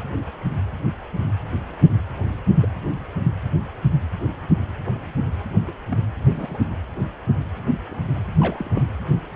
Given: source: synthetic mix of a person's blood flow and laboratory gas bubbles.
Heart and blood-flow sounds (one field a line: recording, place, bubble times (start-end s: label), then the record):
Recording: Doppler ultrasound of blood flow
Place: precordium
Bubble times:
2.61-2.68 s: bubbles
5.67-5.72 s: bubbles
5.90-5.97 s: bubbles
6.30-6.58 s: bubbles
7.90-8.01 s: bubbles
8.40-8.83 s: bubbles
From the record:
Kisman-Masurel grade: 121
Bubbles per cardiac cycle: 1 to 2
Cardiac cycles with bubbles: 10 to 50%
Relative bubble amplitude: barely perceptible (0.100 to 0.250)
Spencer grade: 2 (many but less than half of the cardiac periods contain bubble signals, singularly or in groups)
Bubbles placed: anywhere in the cardiac cycle